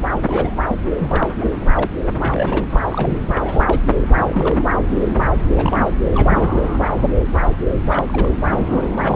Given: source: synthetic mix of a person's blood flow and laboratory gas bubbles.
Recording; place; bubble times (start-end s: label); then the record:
Doppler ultrasound of blood flow; subclavian vein
0.14-0.19 s: bubbles
0.23-0.55 s: bubbles
0.67-0.76 s: bubbles
0.99-1.49 s: bubbles
1.76-1.91 s: bubbles
2.19-2.66 s: bubbles
2.70-2.80 s: bubbles
2.89-3.18 s: bubbles
3.27-3.79 s: bubbles
4.00-4.08 s: bubbles
4.24-4.64 s: bubbles
5.53-5.88 s: bubbles
6.13-6.89 s: bubbles
7.88-8.05 s: bubbles
8.08-8.31 s: bubbles
8.47-8.90 s: bubbles
8.97-9.16 s: bubbles
From the record:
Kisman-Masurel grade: 232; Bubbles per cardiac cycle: several, 3 to 8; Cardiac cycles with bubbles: 50 to 99%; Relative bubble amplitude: moderate (0.250 to 0.450); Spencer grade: 3 (all of the cardiac periods contain showers or single bubble signals, but not dominating or overriding the cardiac motion signals); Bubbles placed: anywhere in the cardiac cycle